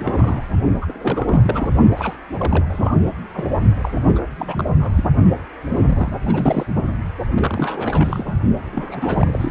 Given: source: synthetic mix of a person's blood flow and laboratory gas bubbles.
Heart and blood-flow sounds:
Doppler ultrasound of blood flow; precordium
0.00-0.44 s: bubbles
0.81-1.69 s: bubbles
1.95-2.17 s: bubbles
2.38-2.65 s: bubbles
2.69-2.99 s: bubbles
3.34-3.51 s: bubbles
3.81-3.91 s: bubbles
3.95-4.00 s: bubbles
4.05-4.27 s: bubbles
4.37-5.04 s: bubbles
5.70-6.12 s: bubbles
6.22-6.67 s: bubbles
7.34-8.33 s: bubbles
8.72-9.51 s: bubbles
From the record:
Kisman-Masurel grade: 342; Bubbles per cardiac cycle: rolling drumbeat, 9 or more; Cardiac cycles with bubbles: 100%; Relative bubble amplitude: moderate (0.250 to 0.450); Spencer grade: 3 (all of the cardiac periods contain showers or single bubble signals, but not dominating or overriding the cardiac motion signals); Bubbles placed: only in the low amplitude regions of the cardiac cycle

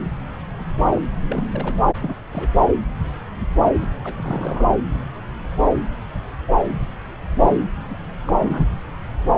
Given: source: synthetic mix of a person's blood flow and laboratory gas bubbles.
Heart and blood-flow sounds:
Doppler ultrasound of blood flow; subclavian vein
0.92-1.01 s: bubbles
1.28-1.44 s: bubbles
1.53-1.75 s: bubbles
1.85-1.88 s: bubbles
1.93-2.16 s: bubbles
2.32-2.50 s: bubbles
3.80-3.87 s: bubbles
4.04-4.64 s: bubbles
7.38-7.66 s: bubbles
7.90-7.95 s: bubbles
8.25-8.33 s: bubbles
8.38-8.68 s: bubbles
From the record:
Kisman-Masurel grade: 221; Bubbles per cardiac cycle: several, 3 to 8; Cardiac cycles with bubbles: 10 to 50%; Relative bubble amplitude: barely perceptible (0.100 to 0.250); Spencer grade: 2 (many but less than half of the cardiac periods contain bubble signals, singularly or in groups); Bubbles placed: anywhere in the cardiac cycle

